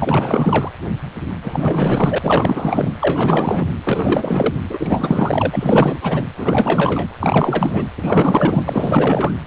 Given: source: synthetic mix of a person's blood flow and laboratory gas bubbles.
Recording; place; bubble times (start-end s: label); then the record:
Doppler ultrasound of blood flow; precordium
0.00-0.71 s: bubbles
1.42-2.19 s: bubbles
2.21-2.94 s: bubbles
2.99-3.68 s: bubbles
3.83-4.54 s: bubbles
4.70-6.25 s: bubbles
6.37-7.07 s: bubbles
7.20-7.85 s: bubbles
7.97-8.63 s: bubbles
8.66-9.32 s: bubbles
From the record:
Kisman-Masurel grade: 444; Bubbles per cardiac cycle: continuous sound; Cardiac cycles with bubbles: 100%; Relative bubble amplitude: maximal (0.775 to 0.999); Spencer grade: 4 (maximum detectable bubble signal sounding continuously throughout systole and diastole of every cardiac period, and overriding the amplitude of the normal cardiac signals); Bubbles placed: anywhere in the cardiac cycle